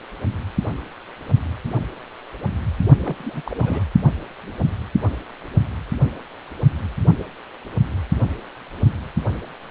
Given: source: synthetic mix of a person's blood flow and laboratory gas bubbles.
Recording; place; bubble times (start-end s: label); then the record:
Doppler ultrasound of blood flow; precordium
3.05-3.42 s: bubbles
3.44-3.56 s: bubbles
3.62-3.84 s: bubbles
From the record:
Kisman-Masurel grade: 211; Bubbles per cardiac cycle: several, 3 to 8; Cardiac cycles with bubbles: 1 to 10%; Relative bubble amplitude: barely perceptible (0.100 to 0.250); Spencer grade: 1 (occasional bubble signal discernible with the cardiac motion signal, with majority of cardiac periods free of bubbles); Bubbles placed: only in the low amplitude regions of the cardiac cycle